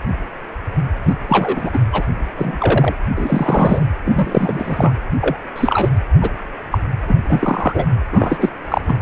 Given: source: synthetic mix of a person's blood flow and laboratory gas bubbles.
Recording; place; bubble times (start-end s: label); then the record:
Doppler ultrasound of blood flow; precordium
1.06-1.14 s: bubbles
1.29-1.70 s: bubbles
1.73-1.79 s: bubbles
1.92-2.02 s: bubbles
2.37-2.94 s: bubbles
3.15-3.83 s: bubbles
4.04-4.93 s: bubbles
5.20-5.36 s: bubbles
5.56-5.89 s: bubbles
6.21-6.30 s: bubbles
6.71-6.79 s: bubbles
7.07-7.15 s: bubbles
7.28-7.85 s: bubbles
8.12-8.49 s: bubbles
8.62-8.96 s: bubbles
From the record:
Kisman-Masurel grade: 243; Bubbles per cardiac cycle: several, 3 to 8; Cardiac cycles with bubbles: 100%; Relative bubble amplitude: loud (0.450 to 0.775); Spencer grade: 3 (all of the cardiac periods contain showers or single bubble signals, but not dominating or overriding the cardiac motion signals); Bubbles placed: anywhere in the cardiac cycle